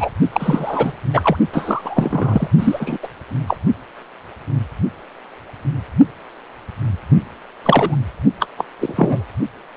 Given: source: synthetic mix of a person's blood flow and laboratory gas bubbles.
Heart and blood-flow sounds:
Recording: Doppler ultrasound of blood flow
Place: precordium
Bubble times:
0.00-0.10 s: bubbles
0.32-0.93 s: bubbles
1.13-1.38 s: bubbles
1.52-2.48 s: bubbles
2.58-2.98 s: bubbles
3.03-3.08 s: bubbles
3.47-3.57 s: bubbles
7.63-7.97 s: bubbles
8.39-8.46 s: bubbles
8.57-8.65 s: bubbles
8.80-9.24 s: bubbles
From the record:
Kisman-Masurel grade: 233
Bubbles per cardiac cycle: several, 3 to 8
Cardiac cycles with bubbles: 50 to 99%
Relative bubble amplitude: loud (0.450 to 0.775)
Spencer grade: 3 (all of the cardiac periods contain showers or single bubble signals, but not dominating or overriding the cardiac motion signals)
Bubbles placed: only in the low amplitude regions of the cardiac cycle

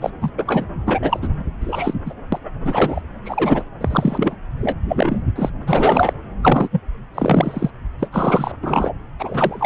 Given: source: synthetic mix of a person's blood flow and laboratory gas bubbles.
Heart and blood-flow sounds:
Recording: Doppler ultrasound of blood flow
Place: subclavian vein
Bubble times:
0.01-0.10 s: bubbles
0.21-0.30 s: bubbles
0.38-0.65 s: bubbles
0.86-1.28 s: bubbles
1.61-2.00 s: bubbles
2.06-2.13 s: bubbles
2.32-2.38 s: bubbles
2.65-3.02 s: bubbles
3.25-3.64 s: bubbles
3.81-4.36 s: bubbles
4.60-4.77 s: bubbles
4.88-5.23 s: bubbles
5.36-5.49 s: bubbles
5.67-6.13 s: bubbles
6.42-6.69 s: bubbles
6.71-6.80 s: bubbles
7.13-7.71 s: bubbles
7.99-8.08 s: bubbles
8.12-8.52 s: bubbles
8.62-8.93 s: bubbles
9.19-9.66 s: bubbles
From the record:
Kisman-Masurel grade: 243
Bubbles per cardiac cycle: several, 3 to 8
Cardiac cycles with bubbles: 100%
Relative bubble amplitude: loud (0.450 to 0.775)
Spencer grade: 3 (all of the cardiac periods contain showers or single bubble signals, but not dominating or overriding the cardiac motion signals)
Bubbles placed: anywhere in the cardiac cycle

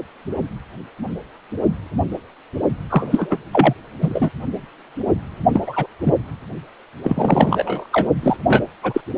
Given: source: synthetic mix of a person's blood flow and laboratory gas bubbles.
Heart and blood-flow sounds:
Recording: Doppler ultrasound of blood flow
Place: precordium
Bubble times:
2.90-3.38 s: bubbles
3.52-3.74 s: bubbles
4.01-4.30 s: bubbles
5.53-5.61 s: bubbles
5.67-5.87 s: bubbles
6.04-6.14 s: bubbles
7.03-7.87 s: bubbles
7.92-8.08 s: bubbles
8.22-8.37 s: bubbles
8.47-8.63 s: bubbles
8.83-9.01 s: bubbles
From the record:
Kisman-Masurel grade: 233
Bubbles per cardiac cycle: several, 3 to 8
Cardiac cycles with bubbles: 50 to 99%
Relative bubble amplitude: loud (0.450 to 0.775)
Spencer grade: 3 (all of the cardiac periods contain showers or single bubble signals, but not dominating or overriding the cardiac motion signals)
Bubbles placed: only in the low amplitude regions of the cardiac cycle

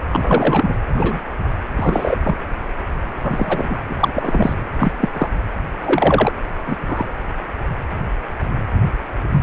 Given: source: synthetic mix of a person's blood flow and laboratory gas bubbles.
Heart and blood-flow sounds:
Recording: Doppler ultrasound of blood flow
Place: precordium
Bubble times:
0.08-0.74 s: bubbles
0.89-1.29 s: bubbles
1.76-2.18 s: bubbles
2.24-2.37 s: bubbles
3.23-3.77 s: bubbles
3.88-4.12 s: bubbles
4.14-4.55 s: bubbles
4.79-4.92 s: bubbles
5.00-5.08 s: bubbles
5.13-5.29 s: bubbles
5.85-6.33 s: bubbles
6.67-6.77 s: bubbles
6.87-7.06 s: bubbles
From the record:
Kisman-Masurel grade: 233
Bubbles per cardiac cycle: several, 3 to 8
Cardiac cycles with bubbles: 50 to 99%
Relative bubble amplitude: loud (0.450 to 0.775)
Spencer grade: 3 (all of the cardiac periods contain showers or single bubble signals, but not dominating or overriding the cardiac motion signals)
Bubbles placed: anywhere in the cardiac cycle

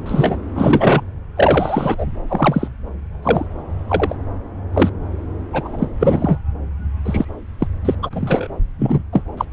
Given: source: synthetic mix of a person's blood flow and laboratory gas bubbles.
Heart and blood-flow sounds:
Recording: Doppler ultrasound of blood flow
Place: subclavian vein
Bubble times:
0.05-0.37 s: bubbles
0.55-1.04 s: bubbles
1.35-2.06 s: bubbles
2.28-2.68 s: bubbles
3.23-3.46 s: bubbles
3.87-4.16 s: bubbles
4.73-4.90 s: bubbles
5.53-5.88 s: bubbles
6.00-6.39 s: bubbles
7.05-7.25 s: bubbles
7.60-7.68 s: bubbles
7.85-7.95 s: bubbles
8.02-8.09 s: bubbles
8.12-8.47 s: bubbles
8.79-9.02 s: bubbles
9.12-9.24 s: bubbles
9.37-9.45 s: bubbles
From the record:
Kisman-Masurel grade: 243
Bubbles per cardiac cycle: several, 3 to 8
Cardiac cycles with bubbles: 100%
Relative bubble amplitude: loud (0.450 to 0.775)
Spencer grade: 3 (all of the cardiac periods contain showers or single bubble signals, but not dominating or overriding the cardiac motion signals)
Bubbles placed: anywhere in the cardiac cycle

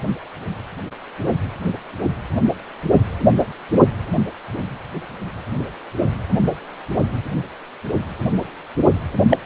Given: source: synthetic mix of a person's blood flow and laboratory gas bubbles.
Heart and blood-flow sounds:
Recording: Doppler ultrasound of blood flow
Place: precordium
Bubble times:
9.29-9.38 s: bubbles
From the record:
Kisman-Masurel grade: 113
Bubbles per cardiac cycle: 1 to 2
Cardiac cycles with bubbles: 1 to 10%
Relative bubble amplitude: loud (0.450 to 0.775)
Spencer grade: 1 (occasional bubble signal discernible with the cardiac motion signal, with majority of cardiac periods free of bubbles)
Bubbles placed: only in the low amplitude regions of the cardiac cycle

